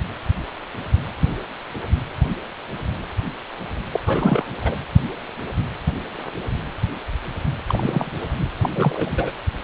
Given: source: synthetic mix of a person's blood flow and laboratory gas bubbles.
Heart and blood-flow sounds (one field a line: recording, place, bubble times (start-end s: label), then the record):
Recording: Doppler ultrasound of blood flow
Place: precordium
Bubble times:
3.92-4.00 s: bubbles
4.05-4.44 s: bubbles
4.61-4.77 s: bubbles
7.68-8.20 s: bubbles
8.61-9.32 s: bubbles
From the record:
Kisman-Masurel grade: 222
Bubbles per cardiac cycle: several, 3 to 8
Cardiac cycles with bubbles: 10 to 50%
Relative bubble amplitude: moderate (0.250 to 0.450)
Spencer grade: 2 (many but less than half of the cardiac periods contain bubble signals, singularly or in groups)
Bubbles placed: anywhere in the cardiac cycle